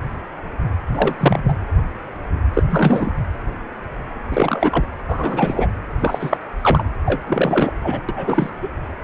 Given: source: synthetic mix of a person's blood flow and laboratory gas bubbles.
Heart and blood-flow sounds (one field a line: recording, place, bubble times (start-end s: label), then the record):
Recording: Doppler ultrasound of blood flow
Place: precordium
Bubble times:
0.88-1.59 s: bubbles
2.54-2.63 s: bubbles
2.71-3.13 s: bubbles
4.30-4.84 s: bubbles
5.08-5.68 s: bubbles
6.00-6.38 s: bubbles
6.62-6.83 s: bubbles
7.05-7.22 s: bubbles
7.26-7.72 s: bubbles
7.83-8.01 s: bubbles
8.08-8.49 s: bubbles
8.62-8.68 s: bubbles
From the record:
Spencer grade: 3 (all of the cardiac periods contain showers or single bubble signals, but not dominating or overriding the cardiac motion signals)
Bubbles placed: anywhere in the cardiac cycle